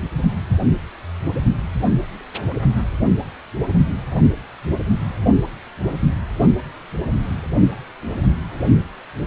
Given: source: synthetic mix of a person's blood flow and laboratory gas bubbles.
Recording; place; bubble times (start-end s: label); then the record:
Doppler ultrasound of blood flow; precordium
no bubbles
From the record:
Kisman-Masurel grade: 000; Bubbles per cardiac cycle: 0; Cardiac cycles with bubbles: 0%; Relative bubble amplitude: no bubbles discernible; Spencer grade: 0 (complete lack of bubble signals)